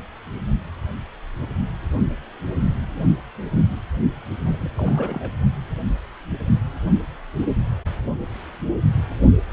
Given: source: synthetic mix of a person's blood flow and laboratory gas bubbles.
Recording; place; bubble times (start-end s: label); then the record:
Doppler ultrasound of blood flow; precordium
4.43-4.71 s: bubbles
4.76-5.31 s: bubbles
From the record:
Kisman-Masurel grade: 211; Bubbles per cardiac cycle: several, 3 to 8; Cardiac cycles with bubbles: 1 to 10%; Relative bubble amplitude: barely perceptible (0.100 to 0.250); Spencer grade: 1 (occasional bubble signal discernible with the cardiac motion signal, with majority of cardiac periods free of bubbles); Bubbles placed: only in the low amplitude regions of the cardiac cycle